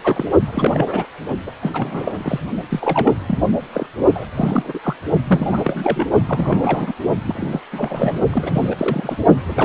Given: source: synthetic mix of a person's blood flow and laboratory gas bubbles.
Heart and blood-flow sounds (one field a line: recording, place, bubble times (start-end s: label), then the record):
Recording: Doppler ultrasound of blood flow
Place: precordium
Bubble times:
0.03-0.28 s: bubbles
0.46-1.06 s: bubbles
1.46-1.51 s: bubbles
1.61-2.40 s: bubbles
2.70-3.13 s: bubbles
3.26-3.39 s: bubbles
3.73-3.87 s: bubbles
4.15-4.25 s: bubbles
4.34-4.79 s: bubbles
4.83-4.96 s: bubbles
5.27-6.07 s: bubbles
6.26-6.94 s: bubbles
7.27-7.61 s: bubbles
7.72-8.20 s: bubbles
8.32-8.76 s: bubbles
8.78-9.17 s: bubbles
9.45-9.65 s: bubbles
From the record:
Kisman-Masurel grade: 342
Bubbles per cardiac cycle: rolling drumbeat, 9 or more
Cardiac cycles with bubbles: 100%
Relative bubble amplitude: moderate (0.250 to 0.450)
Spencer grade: 3 (all of the cardiac periods contain showers or single bubble signals, but not dominating or overriding the cardiac motion signals)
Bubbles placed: only in the low amplitude regions of the cardiac cycle